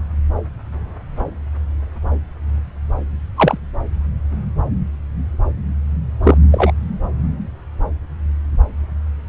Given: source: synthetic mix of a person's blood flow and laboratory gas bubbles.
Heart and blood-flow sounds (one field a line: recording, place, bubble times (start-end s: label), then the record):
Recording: Doppler ultrasound of blood flow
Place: subclavian vein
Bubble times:
3.36-3.58 s: bubbles
6.23-6.38 s: bubbles
6.51-6.71 s: bubbles
From the record:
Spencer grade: 2 (many but less than half of the cardiac periods contain bubble signals, singularly or in groups)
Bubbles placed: anywhere in the cardiac cycle